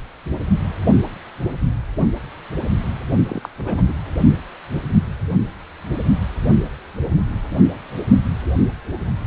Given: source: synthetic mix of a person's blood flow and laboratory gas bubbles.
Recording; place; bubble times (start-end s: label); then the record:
Doppler ultrasound of blood flow; precordium
3.29-3.49 s: bubbles
3.58-3.93 s: bubbles
From the record:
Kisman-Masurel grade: 212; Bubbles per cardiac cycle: several, 3 to 8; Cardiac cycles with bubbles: 1 to 10%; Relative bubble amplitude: moderate (0.250 to 0.450); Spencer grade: 1 (occasional bubble signal discernible with the cardiac motion signal, with majority of cardiac periods free of bubbles); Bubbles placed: only in the low amplitude regions of the cardiac cycle